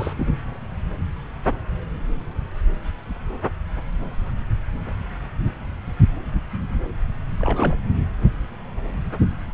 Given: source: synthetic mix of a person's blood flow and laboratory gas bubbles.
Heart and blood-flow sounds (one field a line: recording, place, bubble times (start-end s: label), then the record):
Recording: Doppler ultrasound of blood flow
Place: subclavian vein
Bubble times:
0.00-0.13 s: bubbles
0.17-0.27 s: bubbles
7.38-7.77 s: bubbles
From the record:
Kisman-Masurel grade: 211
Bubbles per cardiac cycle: several, 3 to 8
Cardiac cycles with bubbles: 1 to 10%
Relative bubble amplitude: barely perceptible (0.100 to 0.250)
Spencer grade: 1 (occasional bubble signal discernible with the cardiac motion signal, with majority of cardiac periods free of bubbles)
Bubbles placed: anywhere in the cardiac cycle